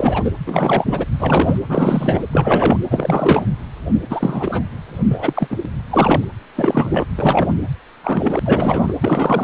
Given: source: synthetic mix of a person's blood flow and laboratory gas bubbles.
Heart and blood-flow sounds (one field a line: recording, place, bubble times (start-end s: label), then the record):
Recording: Doppler ultrasound of blood flow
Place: precordium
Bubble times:
0.00-0.33 s: bubbles
0.47-1.06 s: bubbles
1.20-1.59 s: bubbles
1.69-2.24 s: bubbles
2.31-2.77 s: bubbles
2.90-3.46 s: bubbles
3.93-4.00 s: bubbles
4.09-4.63 s: bubbles
5.08-5.57 s: bubbles
5.63-5.66 s: bubbles
5.89-6.25 s: bubbles
6.55-7.06 s: bubbles
7.16-7.54 s: bubbles
8.04-8.39 s: bubbles
8.45-8.93 s: bubbles
9.00-9.44 s: bubbles
From the record:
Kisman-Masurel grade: 343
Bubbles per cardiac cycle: rolling drumbeat, 9 or more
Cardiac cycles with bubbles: 100%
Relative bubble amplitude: loud (0.450 to 0.775)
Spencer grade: 3 (all of the cardiac periods contain showers or single bubble signals, but not dominating or overriding the cardiac motion signals)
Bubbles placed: anywhere in the cardiac cycle